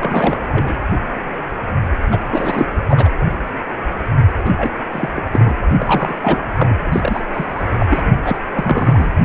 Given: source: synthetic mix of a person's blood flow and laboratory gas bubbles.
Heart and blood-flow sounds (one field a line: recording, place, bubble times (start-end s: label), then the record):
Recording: Doppler ultrasound of blood flow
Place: precordium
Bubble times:
0.01-0.43 s: bubbles
0.52-0.76 s: bubbles
2.10-2.20 s: bubbles
2.31-2.66 s: bubbles
2.89-3.10 s: bubbles
4.44-4.72 s: bubbles
4.92-5.09 s: bubbles
5.15-5.23 s: bubbles
5.32-5.54 s: bubbles
5.78-6.44 s: bubbles
6.58-6.75 s: bubbles
6.92-7.24 s: bubbles
7.30-7.63 s: bubbles
7.71-7.87 s: bubbles
7.89-8.02 s: bubbles
8.24-8.38 s: bubbles
8.55-9.12 s: bubbles
From the record:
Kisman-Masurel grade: 332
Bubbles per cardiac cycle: rolling drumbeat, 9 or more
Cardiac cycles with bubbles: 50 to 99%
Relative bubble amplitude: moderate (0.250 to 0.450)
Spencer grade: 3 (all of the cardiac periods contain showers or single bubble signals, but not dominating or overriding the cardiac motion signals)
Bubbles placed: anywhere in the cardiac cycle